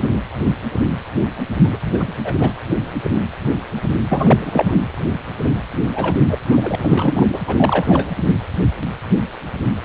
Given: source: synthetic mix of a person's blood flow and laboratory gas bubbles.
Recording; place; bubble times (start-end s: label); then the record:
Doppler ultrasound of blood flow; precordium
0.01-0.20 s: bubbles
1.63-1.69 s: bubbles
1.72-1.77 s: bubbles
1.94-2.12 s: bubbles
2.24-2.35 s: bubbles
2.38-2.52 s: bubbles
4.09-4.81 s: bubbles
5.93-6.16 s: bubbles
6.28-6.38 s: bubbles
6.52-6.75 s: bubbles
6.83-7.27 s: bubbles
7.33-7.39 s: bubbles
7.47-8.08 s: bubbles
From the record:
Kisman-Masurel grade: 332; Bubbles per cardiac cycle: rolling drumbeat, 9 or more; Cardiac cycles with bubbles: 50 to 99%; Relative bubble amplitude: moderate (0.250 to 0.450); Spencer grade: 3 (all of the cardiac periods contain showers or single bubble signals, but not dominating or overriding the cardiac motion signals); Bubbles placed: anywhere in the cardiac cycle